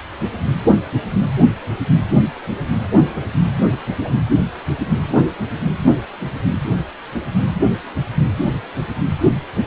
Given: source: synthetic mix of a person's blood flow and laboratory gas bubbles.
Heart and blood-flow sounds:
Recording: Doppler ultrasound of blood flow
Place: precordium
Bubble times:
3.71-3.79 s: bubbles
4.04-4.12 s: bubbles
From the record:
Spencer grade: 1 (occasional bubble signal discernible with the cardiac motion signal, with majority of cardiac periods free of bubbles)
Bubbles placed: anywhere in the cardiac cycle

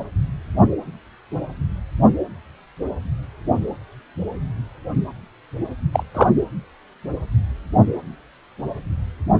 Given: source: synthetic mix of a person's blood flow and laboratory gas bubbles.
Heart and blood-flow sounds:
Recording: Doppler ultrasound of blood flow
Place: precordium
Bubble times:
5.93-6.03 s: bubbles
6.14-6.29 s: bubbles
From the record:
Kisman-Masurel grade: 113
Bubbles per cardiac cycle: 1 to 2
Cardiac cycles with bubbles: 1 to 10%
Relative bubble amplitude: loud (0.450 to 0.775)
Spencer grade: 1 (occasional bubble signal discernible with the cardiac motion signal, with majority of cardiac periods free of bubbles)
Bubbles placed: anywhere in the cardiac cycle

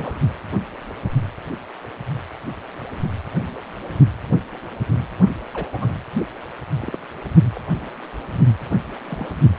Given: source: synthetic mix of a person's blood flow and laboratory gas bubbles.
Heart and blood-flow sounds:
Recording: Doppler ultrasound of blood flow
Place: precordium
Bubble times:
0.00-0.18 s: bubbles
5.53-5.68 s: bubbles
5.72-5.93 s: bubbles
6.79-6.99 s: bubbles
7.55-7.59 s: bubbles
9.01-9.36 s: bubbles
From the record:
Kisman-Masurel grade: 121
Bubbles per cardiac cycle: 1 to 2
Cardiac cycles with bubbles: 10 to 50%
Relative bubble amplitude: barely perceptible (0.100 to 0.250)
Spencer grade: 2 (many but less than half of the cardiac periods contain bubble signals, singularly or in groups)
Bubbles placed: only in the low amplitude regions of the cardiac cycle

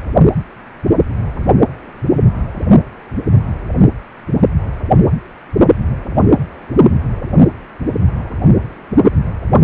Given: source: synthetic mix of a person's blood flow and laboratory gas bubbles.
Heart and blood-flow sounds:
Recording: Doppler ultrasound of blood flow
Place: precordium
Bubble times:
9.04-9.11 s: bubbles
From the record:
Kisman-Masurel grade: 113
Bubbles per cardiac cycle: 1 to 2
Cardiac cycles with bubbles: 1 to 10%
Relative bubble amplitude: loud (0.450 to 0.775)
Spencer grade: 1 (occasional bubble signal discernible with the cardiac motion signal, with majority of cardiac periods free of bubbles)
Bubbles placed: anywhere in the cardiac cycle

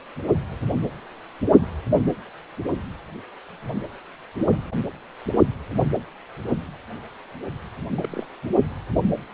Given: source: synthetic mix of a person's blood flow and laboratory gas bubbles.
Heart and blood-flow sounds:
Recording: Doppler ultrasound of blood flow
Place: precordium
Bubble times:
7.95-8.27 s: bubbles
From the record:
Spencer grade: 1 (occasional bubble signal discernible with the cardiac motion signal, with majority of cardiac periods free of bubbles)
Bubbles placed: only in the low amplitude regions of the cardiac cycle

